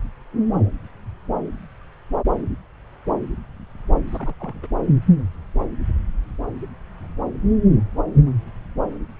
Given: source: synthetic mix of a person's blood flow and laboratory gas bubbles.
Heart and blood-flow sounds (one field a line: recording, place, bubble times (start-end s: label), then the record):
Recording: Doppler ultrasound of blood flow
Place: subclavian vein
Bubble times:
4.07-4.34 s: bubbles
4.40-4.67 s: bubbles
From the record:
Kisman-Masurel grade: 211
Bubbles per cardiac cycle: several, 3 to 8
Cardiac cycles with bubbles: 1 to 10%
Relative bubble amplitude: barely perceptible (0.100 to 0.250)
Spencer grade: 1 (occasional bubble signal discernible with the cardiac motion signal, with majority of cardiac periods free of bubbles)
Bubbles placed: anywhere in the cardiac cycle